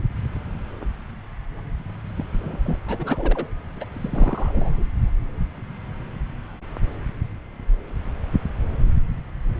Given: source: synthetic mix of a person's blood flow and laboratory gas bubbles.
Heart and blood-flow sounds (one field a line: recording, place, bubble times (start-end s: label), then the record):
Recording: Doppler ultrasound of blood flow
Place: subclavian vein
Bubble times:
2.17-2.25 s: bubbles
2.32-2.79 s: bubbles
2.86-3.47 s: bubbles
3.80-3.85 s: bubbles
3.93-4.84 s: bubbles
From the record:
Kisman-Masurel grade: 221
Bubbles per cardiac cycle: several, 3 to 8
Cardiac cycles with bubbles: 10 to 50%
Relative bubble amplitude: barely perceptible (0.100 to 0.250)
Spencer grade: 2 (many but less than half of the cardiac periods contain bubble signals, singularly or in groups)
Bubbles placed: anywhere in the cardiac cycle